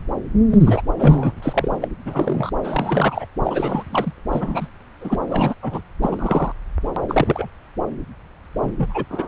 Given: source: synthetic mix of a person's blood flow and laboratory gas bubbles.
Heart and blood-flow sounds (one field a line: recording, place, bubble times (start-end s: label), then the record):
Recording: Doppler ultrasound of blood flow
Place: subclavian vein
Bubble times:
0.50-0.82 s: bubbles
0.98-1.32 s: bubbles
1.42-1.76 s: bubbles
1.81-1.88 s: bubbles
2.05-2.51 s: bubbles
2.63-3.25 s: bubbles
3.44-3.83 s: bubbles
3.86-4.13 s: bubbles
4.32-4.68 s: bubbles
5.00-5.16 s: bubbles
5.29-5.54 s: bubbles
5.62-5.81 s: bubbles
6.02-6.52 s: bubbles
7.08-7.49 s: bubbles
8.56-9.04 s: bubbles
9.10-9.28 s: bubbles
From the record:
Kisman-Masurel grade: 242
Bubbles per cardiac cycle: several, 3 to 8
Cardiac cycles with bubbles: 100%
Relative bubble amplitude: moderate (0.250 to 0.450)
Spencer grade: 3 (all of the cardiac periods contain showers or single bubble signals, but not dominating or overriding the cardiac motion signals)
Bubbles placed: anywhere in the cardiac cycle